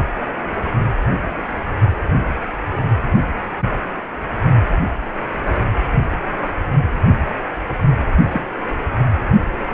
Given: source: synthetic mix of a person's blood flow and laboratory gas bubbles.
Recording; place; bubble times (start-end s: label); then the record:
Doppler ultrasound of blood flow; precordium
8.31-8.46 s: bubbles
From the record:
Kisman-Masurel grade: 113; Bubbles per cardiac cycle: 1 to 2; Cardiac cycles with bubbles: 1 to 10%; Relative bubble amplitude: loud (0.450 to 0.775); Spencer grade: 1 (occasional bubble signal discernible with the cardiac motion signal, with majority of cardiac periods free of bubbles); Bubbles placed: only in the low amplitude regions of the cardiac cycle